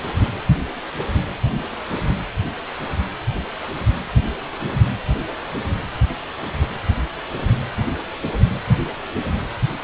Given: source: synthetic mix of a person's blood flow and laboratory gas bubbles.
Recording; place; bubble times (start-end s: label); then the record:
Doppler ultrasound of blood flow; precordium
no bubbles
From the record:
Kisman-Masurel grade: 000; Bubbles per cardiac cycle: 0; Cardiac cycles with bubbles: 0%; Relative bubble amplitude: no bubbles discernible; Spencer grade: 0 (complete lack of bubble signals)